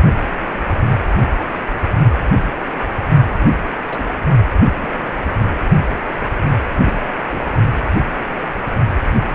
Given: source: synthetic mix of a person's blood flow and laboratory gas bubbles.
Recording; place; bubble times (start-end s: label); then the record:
Doppler ultrasound of blood flow; precordium
3.88-4.03 s: bubbles
4.63-4.73 s: bubbles
4.81-5.18 s: bubbles
6.84-6.99 s: bubbles
7.29-7.44 s: bubbles
From the record:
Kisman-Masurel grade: 121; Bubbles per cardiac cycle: 1 to 2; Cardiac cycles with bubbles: 10 to 50%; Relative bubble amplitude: barely perceptible (0.100 to 0.250); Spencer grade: 2 (many but less than half of the cardiac periods contain bubble signals, singularly or in groups); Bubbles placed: only in the low amplitude regions of the cardiac cycle